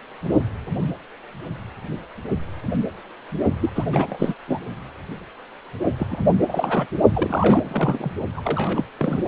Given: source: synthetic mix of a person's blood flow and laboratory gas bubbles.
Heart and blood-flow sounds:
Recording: Doppler ultrasound of blood flow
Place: precordium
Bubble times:
3.61-3.70 s: bubbles
3.75-3.85 s: bubbles
3.92-4.34 s: bubbles
4.48-4.60 s: bubbles
5.98-6.07 s: bubbles
6.10-6.33 s: bubbles
6.41-6.46 s: bubbles
6.49-6.86 s: bubbles
7.13-8.12 s: bubbles
8.33-8.85 s: bubbles
8.98-9.22 s: bubbles
From the record:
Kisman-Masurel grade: 332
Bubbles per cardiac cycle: rolling drumbeat, 9 or more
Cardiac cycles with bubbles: 50 to 99%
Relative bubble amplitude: moderate (0.250 to 0.450)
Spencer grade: 3 (all of the cardiac periods contain showers or single bubble signals, but not dominating or overriding the cardiac motion signals)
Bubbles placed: only in the low amplitude regions of the cardiac cycle

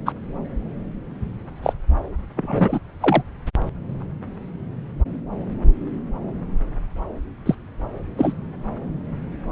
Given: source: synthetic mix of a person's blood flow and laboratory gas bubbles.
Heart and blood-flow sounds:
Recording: Doppler ultrasound of blood flow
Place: subclavian vein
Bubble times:
0.05-0.12 s: bubbles
1.62-1.73 s: bubbles
2.36-2.79 s: bubbles
3.01-3.23 s: bubbles
7.46-7.55 s: bubbles
8.18-8.33 s: bubbles
From the record:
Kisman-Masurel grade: 123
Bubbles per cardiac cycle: 1 to 2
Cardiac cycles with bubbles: 10 to 50%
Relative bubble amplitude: loud (0.450 to 0.775)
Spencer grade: 2 (many but less than half of the cardiac periods contain bubble signals, singularly or in groups)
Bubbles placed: anywhere in the cardiac cycle

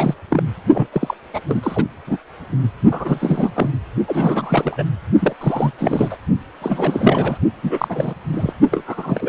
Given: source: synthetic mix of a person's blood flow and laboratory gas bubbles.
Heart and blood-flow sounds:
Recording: Doppler ultrasound of blood flow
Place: precordium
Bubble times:
0.00-0.15 s: bubbles
0.30-0.43 s: bubbles
0.74-0.87 s: bubbles
0.92-1.14 s: bubbles
1.33-1.41 s: bubbles
1.49-1.84 s: bubbles
2.07-2.18 s: bubbles
2.91-3.50 s: bubbles
3.55-3.70 s: bubbles
4.07-4.84 s: bubbles
5.19-5.33 s: bubbles
5.41-5.71 s: bubbles
5.78-6.17 s: bubbles
6.62-7.38 s: bubbles
7.63-8.14 s: bubbles
8.32-8.53 s: bubbles
8.71-8.84 s: bubbles
8.86-9.28 s: bubbles
From the record:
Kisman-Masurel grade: 342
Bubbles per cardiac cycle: rolling drumbeat, 9 or more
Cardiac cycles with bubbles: 100%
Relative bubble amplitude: moderate (0.250 to 0.450)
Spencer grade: 3 (all of the cardiac periods contain showers or single bubble signals, but not dominating or overriding the cardiac motion signals)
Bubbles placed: only in the low amplitude regions of the cardiac cycle

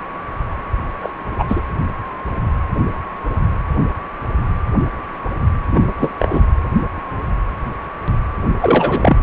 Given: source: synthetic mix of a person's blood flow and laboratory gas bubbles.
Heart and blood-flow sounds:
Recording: Doppler ultrasound of blood flow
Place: precordium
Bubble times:
1.03-1.13 s: bubbles
1.38-1.62 s: bubbles
5.71-5.92 s: bubbles
6.00-6.12 s: bubbles
6.19-6.41 s: bubbles
8.60-9.17 s: bubbles
From the record:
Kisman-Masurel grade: 223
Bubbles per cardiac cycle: several, 3 to 8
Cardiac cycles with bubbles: 10 to 50%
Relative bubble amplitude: loud (0.450 to 0.775)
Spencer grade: 2 (many but less than half of the cardiac periods contain bubble signals, singularly or in groups)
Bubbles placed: anywhere in the cardiac cycle

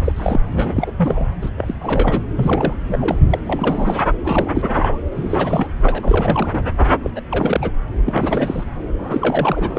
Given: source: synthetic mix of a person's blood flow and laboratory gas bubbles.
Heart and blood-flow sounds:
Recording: Doppler ultrasound of blood flow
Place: subclavian vein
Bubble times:
0.00-0.12 s: bubbles
0.16-0.40 s: bubbles
0.52-0.92 s: bubbles
0.97-1.28 s: bubbles
1.42-1.50 s: bubbles
1.57-1.74 s: bubbles
1.80-2.22 s: bubbles
2.36-2.74 s: bubbles
2.87-3.18 s: bubbles
3.30-3.39 s: bubbles
3.46-4.03 s: bubbles
4.24-4.62 s: bubbles
4.67-5.00 s: bubbles
5.16-5.67 s: bubbles
5.83-6.71 s: bubbles
7.03-7.11 s: bubbles
7.15-7.21 s: bubbles
7.31-7.71 s: bubbles
8.04-8.63 s: bubbles
8.98-9.79 s: bubbles
From the record:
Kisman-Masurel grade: 342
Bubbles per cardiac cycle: rolling drumbeat, 9 or more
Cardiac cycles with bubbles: 100%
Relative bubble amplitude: moderate (0.250 to 0.450)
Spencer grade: 3 (all of the cardiac periods contain showers or single bubble signals, but not dominating or overriding the cardiac motion signals)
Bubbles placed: anywhere in the cardiac cycle

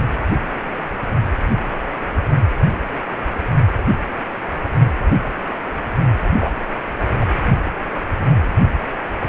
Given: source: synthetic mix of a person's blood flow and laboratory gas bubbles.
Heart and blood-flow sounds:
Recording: Doppler ultrasound of blood flow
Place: precordium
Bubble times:
6.41-6.51 s: bubbles
7.21-7.25 s: bubbles
From the record:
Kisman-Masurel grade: 113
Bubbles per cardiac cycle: 1 to 2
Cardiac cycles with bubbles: 1 to 10%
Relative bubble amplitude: loud (0.450 to 0.775)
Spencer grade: 1 (occasional bubble signal discernible with the cardiac motion signal, with majority of cardiac periods free of bubbles)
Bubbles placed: anywhere in the cardiac cycle

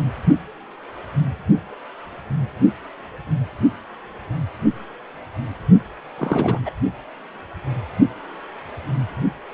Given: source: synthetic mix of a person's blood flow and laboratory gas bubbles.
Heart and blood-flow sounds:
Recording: Doppler ultrasound of blood flow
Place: precordium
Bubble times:
6.18-6.60 s: bubbles
6.66-6.71 s: bubbles
From the record:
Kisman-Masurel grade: 212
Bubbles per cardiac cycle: several, 3 to 8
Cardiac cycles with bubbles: 1 to 10%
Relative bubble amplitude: moderate (0.250 to 0.450)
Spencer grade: 1 (occasional bubble signal discernible with the cardiac motion signal, with majority of cardiac periods free of bubbles)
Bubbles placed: only in the low amplitude regions of the cardiac cycle

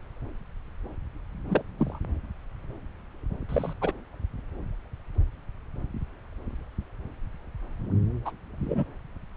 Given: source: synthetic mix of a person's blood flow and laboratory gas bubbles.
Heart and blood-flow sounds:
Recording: Doppler ultrasound of blood flow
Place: subclavian vein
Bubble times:
1.50-1.62 s: bubbles
1.79-1.99 s: bubbles
3.49-3.73 s: bubbles
3.81-3.92 s: bubbles
8.25-8.32 s: bubbles
8.60-8.84 s: bubbles
From the record:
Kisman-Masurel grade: 121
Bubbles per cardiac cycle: 1 to 2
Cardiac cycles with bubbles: 10 to 50%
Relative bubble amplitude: barely perceptible (0.100 to 0.250)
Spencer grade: 2 (many but less than half of the cardiac periods contain bubble signals, singularly or in groups)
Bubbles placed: anywhere in the cardiac cycle

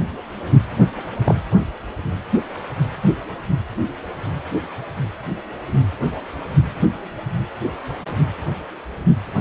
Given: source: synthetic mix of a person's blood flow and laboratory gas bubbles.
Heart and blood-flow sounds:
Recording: Doppler ultrasound of blood flow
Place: precordium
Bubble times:
1.25-1.35 s: bubbles
From the record:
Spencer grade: 1 (occasional bubble signal discernible with the cardiac motion signal, with majority of cardiac periods free of bubbles)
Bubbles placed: anywhere in the cardiac cycle

